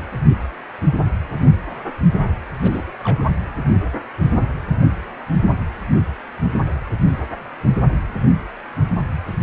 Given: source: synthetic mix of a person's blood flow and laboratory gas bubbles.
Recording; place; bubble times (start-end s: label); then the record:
Doppler ultrasound of blood flow; precordium
2.62-2.85 s: bubbles
3.04-3.23 s: bubbles
From the record:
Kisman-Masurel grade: 211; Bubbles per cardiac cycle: several, 3 to 8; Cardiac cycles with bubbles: 1 to 10%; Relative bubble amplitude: barely perceptible (0.100 to 0.250); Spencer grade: 1 (occasional bubble signal discernible with the cardiac motion signal, with majority of cardiac periods free of bubbles); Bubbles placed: anywhere in the cardiac cycle